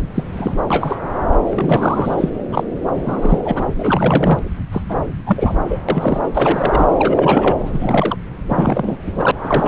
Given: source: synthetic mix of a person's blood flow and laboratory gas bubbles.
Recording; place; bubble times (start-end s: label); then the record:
Doppler ultrasound of blood flow; subclavian vein
0.14-0.23 s: bubbles
0.33-0.54 s: bubbles
0.70-0.98 s: bubbles
1.49-2.29 s: bubbles
2.52-2.64 s: bubbles
2.93-3.40 s: bubbles
3.44-3.68 s: bubbles
3.77-4.39 s: bubbles
4.72-4.82 s: bubbles
4.89-5.02 s: bubbles
5.27-5.56 s: bubbles
5.69-5.79 s: bubbles
5.89-6.21 s: bubbles
6.33-6.87 s: bubbles
6.99-7.56 s: bubbles
7.73-8.17 s: bubbles
8.48-8.97 s: bubbles
9.12-9.31 s: bubbles
9.43-9.68 s: bubbles
From the record:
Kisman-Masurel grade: 342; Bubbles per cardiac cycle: rolling drumbeat, 9 or more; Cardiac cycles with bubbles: 100%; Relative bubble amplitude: moderate (0.250 to 0.450); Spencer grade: 3 (all of the cardiac periods contain showers or single bubble signals, but not dominating or overriding the cardiac motion signals); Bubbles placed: anywhere in the cardiac cycle